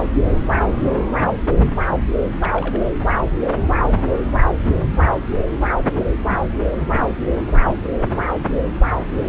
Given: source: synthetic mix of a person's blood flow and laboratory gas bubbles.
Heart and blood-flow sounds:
Doppler ultrasound of blood flow; subclavian vein
0.00-0.03 s: bubbles
0.61-0.74 s: bubbles
2.40-2.85 s: bubbles
6.30-6.43 s: bubbles
6.94-7.12 s: bubbles
7.77-7.90 s: bubbles
8.39-8.46 s: bubbles
From the record:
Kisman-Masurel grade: 121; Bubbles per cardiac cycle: 1 to 2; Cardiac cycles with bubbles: 10 to 50%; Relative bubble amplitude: barely perceptible (0.100 to 0.250); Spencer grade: 2 (many but less than half of the cardiac periods contain bubble signals, singularly or in groups); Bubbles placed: anywhere in the cardiac cycle

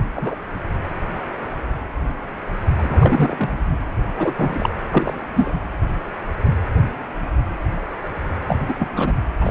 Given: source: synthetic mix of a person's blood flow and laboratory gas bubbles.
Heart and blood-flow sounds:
Doppler ultrasound of blood flow; precordium
0.16-0.35 s: bubbles
2.78-3.53 s: bubbles
4.16-4.70 s: bubbles
4.91-5.21 s: bubbles
5.36-5.54 s: bubbles
8.46-8.56 s: bubbles
8.68-8.73 s: bubbles
8.79-8.89 s: bubbles
8.96-9.13 s: bubbles
9.40-9.51 s: bubbles
From the record:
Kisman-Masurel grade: 233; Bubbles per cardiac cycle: several, 3 to 8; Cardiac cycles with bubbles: 50 to 99%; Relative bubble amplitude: loud (0.450 to 0.775); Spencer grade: 3 (all of the cardiac periods contain showers or single bubble signals, but not dominating or overriding the cardiac motion signals); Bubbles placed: anywhere in the cardiac cycle

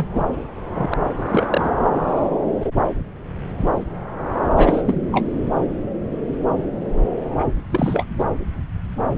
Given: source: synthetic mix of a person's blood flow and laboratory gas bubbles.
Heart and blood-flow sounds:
Doppler ultrasound of blood flow; subclavian vein
0.00-0.07 s: bubbles
0.14-0.24 s: bubbles
0.74-0.94 s: bubbles
1.17-1.71 s: bubbles
4.55-5.27 s: bubbles
7.38-7.46 s: bubbles
7.70-8.05 s: bubbles
8.19-8.24 s: bubbles
From the record:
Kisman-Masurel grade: 223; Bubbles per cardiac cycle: several, 3 to 8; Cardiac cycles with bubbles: 10 to 50%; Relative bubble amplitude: loud (0.450 to 0.775); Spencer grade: 2 (many but less than half of the cardiac periods contain bubble signals, singularly or in groups); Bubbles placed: anywhere in the cardiac cycle

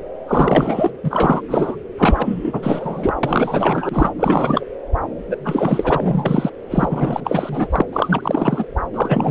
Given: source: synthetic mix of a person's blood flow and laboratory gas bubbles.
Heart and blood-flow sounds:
Doppler ultrasound of blood flow; subclavian vein
0.27-0.91 s: bubbles
1.03-1.42 s: bubbles
1.48-1.76 s: bubbles
1.98-3.13 s: bubbles
3.23-4.10 s: bubbles
4.17-4.65 s: bubbles
5.30-5.38 s: bubbles
5.44-6.50 s: bubbles
6.71-7.68 s: bubbles
7.71-7.82 s: bubbles
7.92-8.66 s: bubbles
8.94-9.31 s: bubbles
From the record:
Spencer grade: 4 (maximum detectable bubble signal sounding continuously throughout systole and diastole of every cardiac period, and overriding the amplitude of the normal cardiac signals); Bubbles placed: anywhere in the cardiac cycle

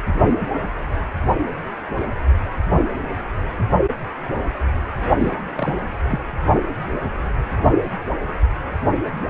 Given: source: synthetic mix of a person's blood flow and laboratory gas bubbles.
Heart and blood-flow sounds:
Doppler ultrasound of blood flow; precordium
5.18-5.35 s: bubbles
5.55-5.76 s: bubbles
6.10-6.19 s: bubbles
From the record:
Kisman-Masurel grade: 211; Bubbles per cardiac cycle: several, 3 to 8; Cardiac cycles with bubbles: 1 to 10%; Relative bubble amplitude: barely perceptible (0.100 to 0.250); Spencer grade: 1 (occasional bubble signal discernible with the cardiac motion signal, with majority of cardiac periods free of bubbles); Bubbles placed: only in the low amplitude regions of the cardiac cycle

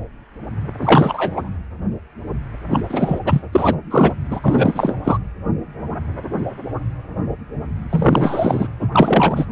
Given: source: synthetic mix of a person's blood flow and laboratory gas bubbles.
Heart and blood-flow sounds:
Doppler ultrasound of blood flow; precordium
0.81-1.49 s: bubbles
2.71-2.83 s: bubbles
2.89-3.20 s: bubbles
3.26-3.42 s: bubbles
3.52-3.76 s: bubbles
3.91-4.13 s: bubbles
4.31-4.40 s: bubbles
4.42-4.95 s: bubbles
5.04-5.18 s: bubbles
7.89-8.68 s: bubbles
8.81-8.88 s: bubbles
8.92-9.46 s: bubbles
From the record:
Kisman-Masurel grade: 333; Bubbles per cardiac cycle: rolling drumbeat, 9 or more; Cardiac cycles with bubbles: 50 to 99%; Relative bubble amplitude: loud (0.450 to 0.775); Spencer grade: 3 (all of the cardiac periods contain showers or single bubble signals, but not dominating or overriding the cardiac motion signals); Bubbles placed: anywhere in the cardiac cycle

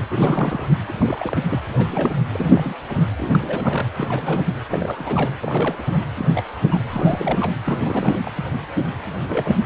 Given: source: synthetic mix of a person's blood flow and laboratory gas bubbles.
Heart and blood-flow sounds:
Doppler ultrasound of blood flow; precordium
0.00-0.04 s: bubbles
0.10-0.68 s: bubbles
0.88-0.92 s: bubbles
0.98-1.62 s: bubbles
1.78-2.22 s: bubbles
2.32-2.75 s: bubbles
2.88-3.04 s: bubbles
3.17-3.88 s: bubbles
4.00-4.46 s: bubbles
4.69-5.30 s: bubbles
5.41-5.75 s: bubbles
5.79-5.83 s: bubbles
5.86-6.07 s: bubbles
6.18-6.25 s: bubbles
6.29-6.46 s: bubbles
6.58-6.84 s: bubbles
6.90-7.54 s: bubbles
7.64-8.32 s: bubbles
9.29-9.57 s: bubbles
From the record:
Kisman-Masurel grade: 332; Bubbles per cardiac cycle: rolling drumbeat, 9 or more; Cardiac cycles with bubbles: 50 to 99%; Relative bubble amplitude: moderate (0.250 to 0.450); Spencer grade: 3 (all of the cardiac periods contain showers or single bubble signals, but not dominating or overriding the cardiac motion signals); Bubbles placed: anywhere in the cardiac cycle

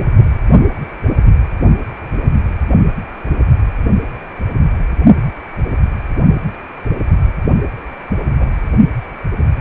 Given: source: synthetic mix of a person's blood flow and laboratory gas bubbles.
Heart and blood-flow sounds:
Doppler ultrasound of blood flow; precordium
8.39-8.52 s: bubbles
From the record:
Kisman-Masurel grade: 111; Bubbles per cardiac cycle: 1 to 2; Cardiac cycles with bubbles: 1 to 10%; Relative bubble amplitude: barely perceptible (0.100 to 0.250); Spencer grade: 1 (occasional bubble signal discernible with the cardiac motion signal, with majority of cardiac periods free of bubbles); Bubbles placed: only in the low amplitude regions of the cardiac cycle

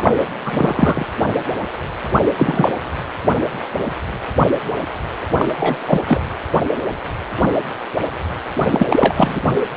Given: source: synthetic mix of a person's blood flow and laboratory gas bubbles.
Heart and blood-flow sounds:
Doppler ultrasound of blood flow; precordium
0.00-0.11 s: bubbles
0.40-1.05 s: bubbles
2.36-2.74 s: bubbles
5.38-5.49 s: bubbles
5.59-5.78 s: bubbles
5.87-6.02 s: bubbles
6.07-6.21 s: bubbles
8.71-9.40 s: bubbles
From the record:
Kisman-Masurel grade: 233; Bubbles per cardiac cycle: several, 3 to 8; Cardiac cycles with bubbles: 50 to 99%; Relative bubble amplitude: loud (0.450 to 0.775); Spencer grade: 3 (all of the cardiac periods contain showers or single bubble signals, but not dominating or overriding the cardiac motion signals); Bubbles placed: anywhere in the cardiac cycle

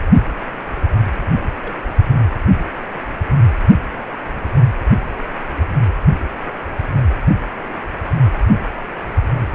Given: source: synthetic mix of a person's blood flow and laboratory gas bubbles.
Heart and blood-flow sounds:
Doppler ultrasound of blood flow; precordium
1.61-1.80 s: bubbles
From the record:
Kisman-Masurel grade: 111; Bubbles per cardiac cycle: 1 to 2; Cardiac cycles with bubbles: 1 to 10%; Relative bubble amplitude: barely perceptible (0.100 to 0.250); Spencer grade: 1 (occasional bubble signal discernible with the cardiac motion signal, with majority of cardiac periods free of bubbles); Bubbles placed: anywhere in the cardiac cycle

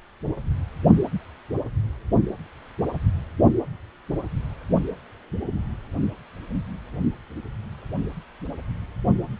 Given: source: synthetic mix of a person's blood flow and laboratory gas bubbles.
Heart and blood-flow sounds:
Doppler ultrasound of blood flow; precordium
no bubbles
From the record:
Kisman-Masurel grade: 000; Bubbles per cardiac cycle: 0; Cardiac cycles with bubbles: 0%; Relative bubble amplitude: no bubbles discernible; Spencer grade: 0 (complete lack of bubble signals)

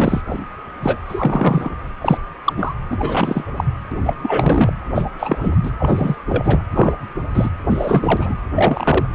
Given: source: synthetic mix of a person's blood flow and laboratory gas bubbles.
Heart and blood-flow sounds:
Doppler ultrasound of blood flow; precordium
0.00-0.21 s: bubbles
0.26-0.39 s: bubbles
0.83-1.00 s: bubbles
1.07-1.75 s: bubbles
2.01-2.18 s: bubbles
2.44-2.54 s: bubbles
2.56-2.75 s: bubbles
2.91-3.44 s: bubbles
3.56-3.64 s: bubbles
3.92-3.98 s: bubbles
4.05-4.13 s: bubbles
4.22-4.72 s: bubbles
4.94-5.03 s: bubbles
5.19-5.56 s: bubbles
5.62-5.70 s: bubbles
5.79-6.16 s: bubbles
6.29-6.63 s: bubbles
6.71-6.92 s: bubbles
7.33-7.49 s: bubbles
7.70-8.35 s: bubbles
8.55-9.07 s: bubbles
From the record:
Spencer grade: 3 (all of the cardiac periods contain showers or single bubble signals, but not dominating or overriding the cardiac motion signals); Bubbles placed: anywhere in the cardiac cycle

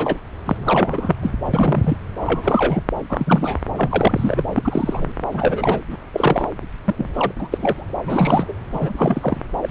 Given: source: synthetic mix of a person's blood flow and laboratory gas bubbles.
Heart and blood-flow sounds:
Doppler ultrasound of blood flow; subclavian vein
0.00-0.17 s: bubbles
0.46-1.15 s: bubbles
1.22-1.33 s: bubbles
1.53-1.97 s: bubbles
2.21-2.81 s: bubbles
3.09-3.58 s: bubbles
3.77-4.44 s: bubbles
4.54-5.12 s: bubbles
5.32-5.80 s: bubbles
5.90-5.97 s: bubbles
6.13-6.49 s: bubbles
6.84-7.10 s: bubbles
7.13-7.32 s: bubbles
7.38-7.49 s: bubbles
7.51-7.85 s: bubbles
8.05-8.53 s: bubbles
8.73-8.93 s: bubbles
8.97-9.40 s: bubbles
9.62-9.70 s: bubbles
From the record:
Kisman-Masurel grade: 332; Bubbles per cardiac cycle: rolling drumbeat, 9 or more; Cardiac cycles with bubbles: 50 to 99%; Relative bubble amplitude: moderate (0.250 to 0.450); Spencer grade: 3 (all of the cardiac periods contain showers or single bubble signals, but not dominating or overriding the cardiac motion signals); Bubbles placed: anywhere in the cardiac cycle

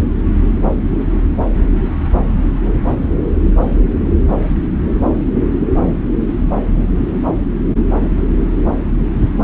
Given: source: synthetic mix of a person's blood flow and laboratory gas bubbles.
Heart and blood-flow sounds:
Doppler ultrasound of blood flow; subclavian vein
no bubbles
From the record:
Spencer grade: 0 (complete lack of bubble signals)

